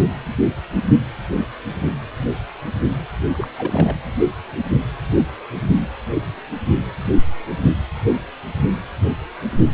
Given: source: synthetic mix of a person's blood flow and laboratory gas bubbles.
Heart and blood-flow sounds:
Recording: Doppler ultrasound of blood flow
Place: precordium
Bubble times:
3.32-3.48 s: bubbles
3.56-3.94 s: bubbles
From the record:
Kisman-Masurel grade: 221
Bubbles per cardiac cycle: several, 3 to 8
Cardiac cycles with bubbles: 10 to 50%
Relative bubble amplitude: barely perceptible (0.100 to 0.250)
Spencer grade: 2 (many but less than half of the cardiac periods contain bubble signals, singularly or in groups)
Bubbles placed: anywhere in the cardiac cycle

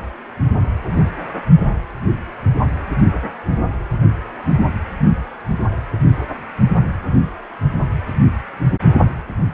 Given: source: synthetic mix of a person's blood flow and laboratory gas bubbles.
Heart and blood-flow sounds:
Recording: Doppler ultrasound of blood flow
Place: precordium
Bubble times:
no bubbles
From the record:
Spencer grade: 0 (complete lack of bubble signals)

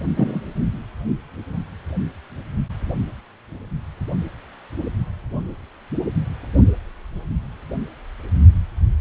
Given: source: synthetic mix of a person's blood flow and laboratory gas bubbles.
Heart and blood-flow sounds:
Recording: Doppler ultrasound of blood flow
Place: precordium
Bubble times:
0.16-0.41 s: bubbles
From the record:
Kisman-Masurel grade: 113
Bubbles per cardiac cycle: 1 to 2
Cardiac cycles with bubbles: 1 to 10%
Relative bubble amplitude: loud (0.450 to 0.775)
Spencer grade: 1 (occasional bubble signal discernible with the cardiac motion signal, with majority of cardiac periods free of bubbles)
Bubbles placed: only in the low amplitude regions of the cardiac cycle

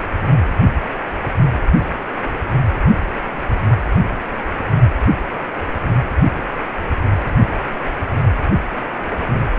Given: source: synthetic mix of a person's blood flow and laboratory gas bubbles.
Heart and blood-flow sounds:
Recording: Doppler ultrasound of blood flow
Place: precordium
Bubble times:
no bubbles
From the record:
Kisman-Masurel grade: 000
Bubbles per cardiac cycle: 0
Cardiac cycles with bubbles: 0%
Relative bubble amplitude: no bubbles discernible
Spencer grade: 0 (complete lack of bubble signals)

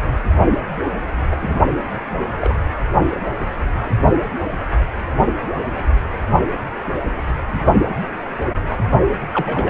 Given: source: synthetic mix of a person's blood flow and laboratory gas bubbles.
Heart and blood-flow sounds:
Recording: Doppler ultrasound of blood flow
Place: precordium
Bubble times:
1.30-1.36 s: bubbles
1.41-1.58 s: bubbles
2.41-2.55 s: bubbles
8.67-8.79 s: bubbles
9.33-9.70 s: bubbles
From the record:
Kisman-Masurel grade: 122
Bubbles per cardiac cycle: 1 to 2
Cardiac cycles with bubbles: 10 to 50%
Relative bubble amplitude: moderate (0.250 to 0.450)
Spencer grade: 2 (many but less than half of the cardiac periods contain bubble signals, singularly or in groups)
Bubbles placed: only in the low amplitude regions of the cardiac cycle

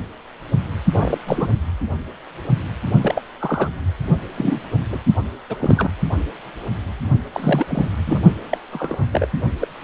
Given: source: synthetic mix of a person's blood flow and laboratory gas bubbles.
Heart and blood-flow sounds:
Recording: Doppler ultrasound of blood flow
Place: precordium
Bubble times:
0.93-1.18 s: bubbles
1.27-1.48 s: bubbles
3.01-3.21 s: bubbles
3.40-3.69 s: bubbles
4.38-4.64 s: bubbles
4.89-4.99 s: bubbles
5.50-5.56 s: bubbles
5.59-5.91 s: bubbles
7.33-7.91 s: bubbles
8.06-8.21 s: bubbles
8.51-8.58 s: bubbles
8.73-9.06 s: bubbles
9.12-9.27 s: bubbles
9.62-9.68 s: bubbles
From the record:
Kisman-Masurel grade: 232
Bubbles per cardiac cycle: several, 3 to 8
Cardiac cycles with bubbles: 50 to 99%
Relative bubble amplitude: moderate (0.250 to 0.450)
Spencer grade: 3 (all of the cardiac periods contain showers or single bubble signals, but not dominating or overriding the cardiac motion signals)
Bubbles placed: only in the low amplitude regions of the cardiac cycle

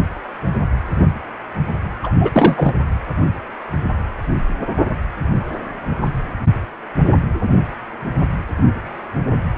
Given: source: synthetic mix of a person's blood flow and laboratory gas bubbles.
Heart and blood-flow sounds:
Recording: Doppler ultrasound of blood flow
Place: precordium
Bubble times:
2.03-2.12 s: bubbles
2.21-2.31 s: bubbles
2.33-2.73 s: bubbles
From the record:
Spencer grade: 1 (occasional bubble signal discernible with the cardiac motion signal, with majority of cardiac periods free of bubbles)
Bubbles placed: anywhere in the cardiac cycle

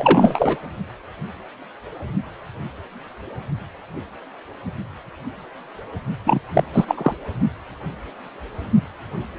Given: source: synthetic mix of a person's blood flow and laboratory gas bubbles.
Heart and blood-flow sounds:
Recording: Doppler ultrasound of blood flow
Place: precordium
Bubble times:
0.00-0.57 s: bubbles
6.26-6.40 s: bubbles
6.53-6.64 s: bubbles
6.72-7.13 s: bubbles
From the record:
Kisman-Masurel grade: 223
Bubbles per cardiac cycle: several, 3 to 8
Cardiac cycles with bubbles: 10 to 50%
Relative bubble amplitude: loud (0.450 to 0.775)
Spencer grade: 2 (many but less than half of the cardiac periods contain bubble signals, singularly or in groups)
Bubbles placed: only in the low amplitude regions of the cardiac cycle

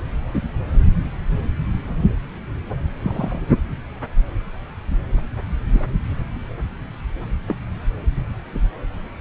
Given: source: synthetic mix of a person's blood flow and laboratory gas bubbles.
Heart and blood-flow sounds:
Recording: Doppler ultrasound of blood flow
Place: subclavian vein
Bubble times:
3.03-3.41 s: bubbles
5.71-5.85 s: bubbles
7.46-7.56 s: bubbles
From the record:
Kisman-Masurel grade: 121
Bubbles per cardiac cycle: 1 to 2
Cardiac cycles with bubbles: 10 to 50%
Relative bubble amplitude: barely perceptible (0.100 to 0.250)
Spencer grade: 2 (many but less than half of the cardiac periods contain bubble signals, singularly or in groups)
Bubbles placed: anywhere in the cardiac cycle

